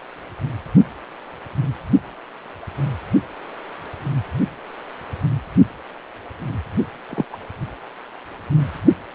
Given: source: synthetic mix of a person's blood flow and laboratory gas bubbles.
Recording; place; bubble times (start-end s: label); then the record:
Doppler ultrasound of blood flow; precordium
7.09-7.25 s: bubbles
7.33-7.37 s: bubbles
From the record:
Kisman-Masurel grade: 122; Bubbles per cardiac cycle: 1 to 2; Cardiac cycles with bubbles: 10 to 50%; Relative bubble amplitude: moderate (0.250 to 0.450); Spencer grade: 2 (many but less than half of the cardiac periods contain bubble signals, singularly or in groups); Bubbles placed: only in the low amplitude regions of the cardiac cycle